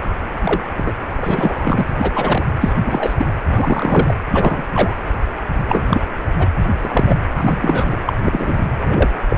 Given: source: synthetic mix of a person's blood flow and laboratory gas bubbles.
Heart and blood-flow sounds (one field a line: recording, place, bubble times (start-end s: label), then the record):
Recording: Doppler ultrasound of blood flow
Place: precordium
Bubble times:
0.42-0.69 s: bubbles
0.76-0.94 s: bubbles
1.17-1.83 s: bubbles
1.98-2.44 s: bubbles
2.60-2.73 s: bubbles
2.85-3.14 s: bubbles
3.17-3.25 s: bubbles
3.50-4.14 s: bubbles
4.30-4.63 s: bubbles
4.72-4.94 s: bubbles
5.68-5.81 s: bubbles
5.87-6.01 s: bubbles
6.38-6.49 s: bubbles
6.83-7.14 s: bubbles
7.35-7.99 s: bubbles
8.05-8.13 s: bubbles
8.20-8.65 s: bubbles
8.89-9.09 s: bubbles
9.29-9.37 s: bubbles
From the record:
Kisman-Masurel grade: 243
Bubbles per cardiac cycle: several, 3 to 8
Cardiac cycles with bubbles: 100%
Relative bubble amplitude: loud (0.450 to 0.775)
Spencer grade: 3 (all of the cardiac periods contain showers or single bubble signals, but not dominating or overriding the cardiac motion signals)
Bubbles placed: anywhere in the cardiac cycle